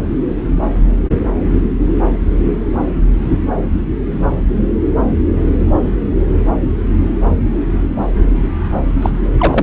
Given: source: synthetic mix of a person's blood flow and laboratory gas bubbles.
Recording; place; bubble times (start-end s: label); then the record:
Doppler ultrasound of blood flow; subclavian vein
9.02-9.10 s: bubbles
9.38-9.63 s: bubbles
From the record:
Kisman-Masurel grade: 213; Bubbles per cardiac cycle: several, 3 to 8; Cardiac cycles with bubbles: 1 to 10%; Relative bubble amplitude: loud (0.450 to 0.775); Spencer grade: 1 (occasional bubble signal discernible with the cardiac motion signal, with majority of cardiac periods free of bubbles); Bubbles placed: anywhere in the cardiac cycle